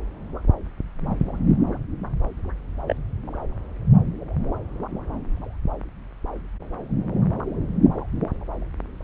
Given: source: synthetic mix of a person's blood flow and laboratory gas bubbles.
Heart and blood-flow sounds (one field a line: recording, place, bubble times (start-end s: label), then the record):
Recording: Doppler ultrasound of blood flow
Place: subclavian vein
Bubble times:
2.88-2.95 s: bubbles
From the record:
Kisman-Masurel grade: 111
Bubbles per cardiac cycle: 1 to 2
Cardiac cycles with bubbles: 1 to 10%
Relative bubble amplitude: barely perceptible (0.100 to 0.250)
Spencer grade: 1 (occasional bubble signal discernible with the cardiac motion signal, with majority of cardiac periods free of bubbles)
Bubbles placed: anywhere in the cardiac cycle